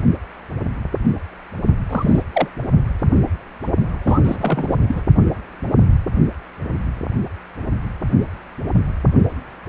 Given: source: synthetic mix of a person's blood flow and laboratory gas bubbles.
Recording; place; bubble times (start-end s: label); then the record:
Doppler ultrasound of blood flow; precordium
1.89-2.23 s: bubbles
2.34-2.48 s: bubbles
4.04-4.20 s: bubbles
4.24-4.79 s: bubbles
4.88-5.01 s: bubbles
From the record:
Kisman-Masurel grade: 222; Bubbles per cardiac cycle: several, 3 to 8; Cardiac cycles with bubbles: 10 to 50%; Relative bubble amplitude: moderate (0.250 to 0.450); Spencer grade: 2 (many but less than half of the cardiac periods contain bubble signals, singularly or in groups); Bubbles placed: only in the low amplitude regions of the cardiac cycle